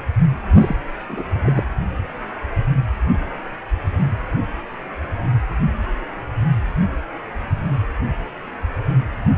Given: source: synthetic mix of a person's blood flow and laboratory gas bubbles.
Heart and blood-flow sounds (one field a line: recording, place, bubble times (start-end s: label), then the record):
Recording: Doppler ultrasound of blood flow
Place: precordium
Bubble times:
0.55-0.76 s: bubbles
1.09-1.25 s: bubbles
1.42-1.53 s: bubbles
1.56-1.63 s: bubbles
From the record:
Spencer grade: 1 (occasional bubble signal discernible with the cardiac motion signal, with majority of cardiac periods free of bubbles)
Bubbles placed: anywhere in the cardiac cycle